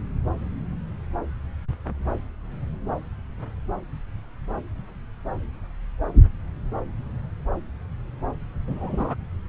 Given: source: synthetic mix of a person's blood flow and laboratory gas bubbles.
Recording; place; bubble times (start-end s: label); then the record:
Doppler ultrasound of blood flow; subclavian vein
8.67-9.15 s: bubbles
From the record:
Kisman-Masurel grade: 112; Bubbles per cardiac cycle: 1 to 2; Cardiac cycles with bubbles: 1 to 10%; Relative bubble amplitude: moderate (0.250 to 0.450); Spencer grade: 1 (occasional bubble signal discernible with the cardiac motion signal, with majority of cardiac periods free of bubbles); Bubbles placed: anywhere in the cardiac cycle